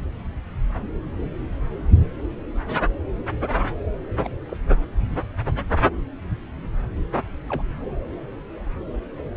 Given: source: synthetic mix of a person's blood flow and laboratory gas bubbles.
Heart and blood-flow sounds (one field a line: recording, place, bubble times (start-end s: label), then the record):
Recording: Doppler ultrasound of blood flow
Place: subclavian vein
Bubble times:
4.24-4.29 s: bubbles
4.49-4.57 s: bubbles
7.49-7.62 s: bubbles
From the record:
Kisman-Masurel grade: 121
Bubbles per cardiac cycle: 1 to 2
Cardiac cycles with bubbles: 10 to 50%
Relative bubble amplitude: barely perceptible (0.100 to 0.250)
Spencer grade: 2 (many but less than half of the cardiac periods contain bubble signals, singularly or in groups)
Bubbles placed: anywhere in the cardiac cycle